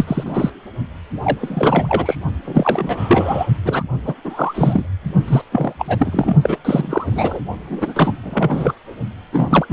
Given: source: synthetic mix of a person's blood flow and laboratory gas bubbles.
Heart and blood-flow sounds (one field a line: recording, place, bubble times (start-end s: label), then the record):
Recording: Doppler ultrasound of blood flow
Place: precordium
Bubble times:
0.00-0.50 s: bubbles
1.23-2.15 s: bubbles
2.44-3.48 s: bubbles
3.65-3.83 s: bubbles
4.03-4.14 s: bubbles
4.24-4.86 s: bubbles
5.27-5.41 s: bubbles
5.51-6.35 s: bubbles
6.42-6.57 s: bubbles
6.64-7.40 s: bubbles
7.69-8.12 s: bubbles
8.23-8.73 s: bubbles
9.32-9.65 s: bubbles
9.69-9.72 s: bubbles
From the record:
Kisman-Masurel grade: 343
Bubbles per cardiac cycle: rolling drumbeat, 9 or more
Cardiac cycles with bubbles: 100%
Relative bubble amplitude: loud (0.450 to 0.775)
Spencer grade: 3 (all of the cardiac periods contain showers or single bubble signals, but not dominating or overriding the cardiac motion signals)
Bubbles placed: only in the low amplitude regions of the cardiac cycle